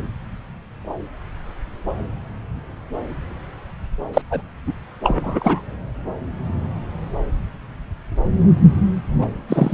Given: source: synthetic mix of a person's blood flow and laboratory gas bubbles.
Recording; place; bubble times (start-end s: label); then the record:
Doppler ultrasound of blood flow; subclavian vein
4.13-4.21 s: bubbles
4.31-4.42 s: bubbles
4.67-4.73 s: bubbles
5.04-5.62 s: bubbles
9.21-9.27 s: bubbles
9.48-9.74 s: bubbles
From the record:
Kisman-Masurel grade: 223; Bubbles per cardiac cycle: several, 3 to 8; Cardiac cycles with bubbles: 10 to 50%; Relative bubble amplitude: loud (0.450 to 0.775); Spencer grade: 2 (many but less than half of the cardiac periods contain bubble signals, singularly or in groups); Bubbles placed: anywhere in the cardiac cycle